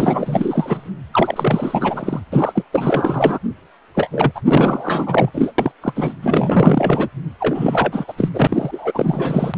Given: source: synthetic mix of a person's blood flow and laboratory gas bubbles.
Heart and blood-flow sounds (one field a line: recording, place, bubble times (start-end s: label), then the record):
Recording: Doppler ultrasound of blood flow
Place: precordium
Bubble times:
0.00-0.89 s: bubbles
1.12-2.20 s: bubbles
2.32-2.65 s: bubbles
2.73-3.39 s: bubbles
3.94-4.31 s: bubbles
4.35-4.42 s: bubbles
4.44-5.31 s: bubbles
5.34-5.51 s: bubbles
5.58-5.71 s: bubbles
5.81-6.17 s: bubbles
6.21-7.08 s: bubbles
7.39-8.04 s: bubbles
8.08-8.13 s: bubbles
8.17-8.29 s: bubbles
8.34-9.57 s: bubbles
From the record:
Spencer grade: 4 (maximum detectable bubble signal sounding continuously throughout systole and diastole of every cardiac period, and overriding the amplitude of the normal cardiac signals)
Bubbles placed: anywhere in the cardiac cycle